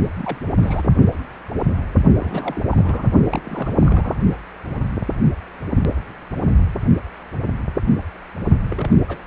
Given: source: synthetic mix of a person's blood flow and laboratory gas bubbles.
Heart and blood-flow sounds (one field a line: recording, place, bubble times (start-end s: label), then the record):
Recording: Doppler ultrasound of blood flow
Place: precordium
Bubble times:
0.16-0.38 s: bubbles
0.51-0.94 s: bubbles
2.17-2.63 s: bubbles
2.71-3.09 s: bubbles
3.28-3.42 s: bubbles
3.46-4.17 s: bubbles
8.64-8.96 s: bubbles
9.08-9.18 s: bubbles
From the record:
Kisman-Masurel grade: 221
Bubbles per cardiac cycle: several, 3 to 8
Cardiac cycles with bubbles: 10 to 50%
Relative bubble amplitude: barely perceptible (0.100 to 0.250)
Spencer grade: 2 (many but less than half of the cardiac periods contain bubble signals, singularly or in groups)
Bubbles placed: only in the low amplitude regions of the cardiac cycle